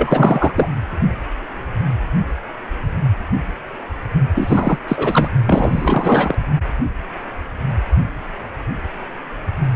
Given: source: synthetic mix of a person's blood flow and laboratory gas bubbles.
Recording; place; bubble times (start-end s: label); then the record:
Doppler ultrasound of blood flow; precordium
0.00-0.52 s: bubbles
0.55-0.68 s: bubbles
4.34-4.78 s: bubbles
4.88-5.29 s: bubbles
5.46-6.34 s: bubbles
From the record:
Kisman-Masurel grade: 333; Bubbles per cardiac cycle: rolling drumbeat, 9 or more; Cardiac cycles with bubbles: 50 to 99%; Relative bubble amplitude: loud (0.450 to 0.775); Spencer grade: 3 (all of the cardiac periods contain showers or single bubble signals, but not dominating or overriding the cardiac motion signals); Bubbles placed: only in the low amplitude regions of the cardiac cycle